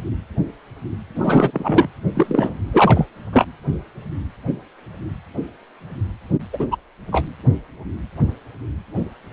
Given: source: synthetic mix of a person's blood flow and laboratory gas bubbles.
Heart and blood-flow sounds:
Doppler ultrasound of blood flow; precordium
1.15-1.88 s: bubbles
2.14-2.56 s: bubbles
2.72-3.07 s: bubbles
3.32-3.45 s: bubbles
6.52-6.66 s: bubbles
6.71-6.76 s: bubbles
7.12-7.25 s: bubbles
From the record:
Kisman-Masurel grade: 223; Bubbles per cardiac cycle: several, 3 to 8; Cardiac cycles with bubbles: 10 to 50%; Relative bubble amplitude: loud (0.450 to 0.775); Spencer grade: 2 (many but less than half of the cardiac periods contain bubble signals, singularly or in groups); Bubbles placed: anywhere in the cardiac cycle

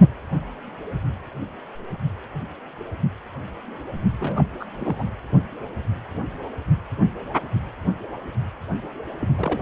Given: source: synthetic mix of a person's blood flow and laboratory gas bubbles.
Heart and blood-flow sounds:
Doppler ultrasound of blood flow; precordium
4.19-4.45 s: bubbles
4.60-4.66 s: bubbles
4.79-5.04 s: bubbles
9.19-9.62 s: bubbles
From the record:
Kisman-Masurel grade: 221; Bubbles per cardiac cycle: several, 3 to 8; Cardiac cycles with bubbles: 10 to 50%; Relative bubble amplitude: barely perceptible (0.100 to 0.250); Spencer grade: 2 (many but less than half of the cardiac periods contain bubble signals, singularly or in groups); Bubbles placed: anywhere in the cardiac cycle

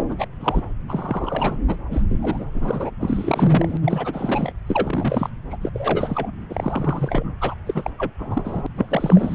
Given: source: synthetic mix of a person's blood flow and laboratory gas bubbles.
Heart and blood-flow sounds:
Doppler ultrasound of blood flow; subclavian vein
0.00-0.03 s: bubbles
0.09-0.15 s: bubbles
0.18-0.26 s: bubbles
0.39-0.61 s: bubbles
0.88-1.57 s: bubbles
1.68-1.82 s: bubbles
1.91-2.02 s: bubbles
2.09-2.18 s: bubbles
2.22-2.45 s: bubbles
2.54-2.90 s: bubbles
3.00-3.77 s: bubbles
3.80-4.52 s: bubbles
4.67-5.29 s: bubbles
5.50-5.56 s: bubbles
5.62-5.69 s: bubbles
5.73-6.30 s: bubbles
6.50-7.33 s: bubbles
7.41-7.54 s: bubbles
7.66-7.91 s: bubbles
7.99-8.12 s: bubbles
8.19-8.67 s: bubbles
8.76-9.35 s: bubbles
From the record:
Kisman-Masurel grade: 342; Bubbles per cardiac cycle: rolling drumbeat, 9 or more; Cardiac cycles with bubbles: 100%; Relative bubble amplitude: moderate (0.250 to 0.450); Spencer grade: 3 (all of the cardiac periods contain showers or single bubble signals, but not dominating or overriding the cardiac motion signals); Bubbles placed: anywhere in the cardiac cycle

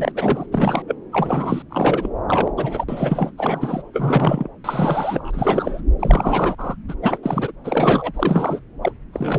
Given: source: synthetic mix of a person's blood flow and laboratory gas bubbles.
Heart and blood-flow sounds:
Doppler ultrasound of blood flow; subclavian vein
0.00-0.12 s: bubbles
0.15-0.46 s: bubbles
0.51-0.82 s: bubbles
0.86-0.96 s: bubbles
1.12-1.62 s: bubbles
1.70-2.08 s: bubbles
2.28-2.50 s: bubbles
2.57-2.84 s: bubbles
2.88-3.32 s: bubbles
3.38-3.82 s: bubbles
3.93-4.48 s: bubbles
4.64-5.81 s: bubbles
6.00-6.76 s: bubbles
6.88-6.94 s: bubbles
7.02-7.17 s: bubbles
7.22-7.51 s: bubbles
7.64-8.61 s: bubbles
8.82-8.92 s: bubbles
9.12-9.39 s: bubbles
From the record:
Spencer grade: 3 (all of the cardiac periods contain showers or single bubble signals, but not dominating or overriding the cardiac motion signals); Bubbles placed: anywhere in the cardiac cycle

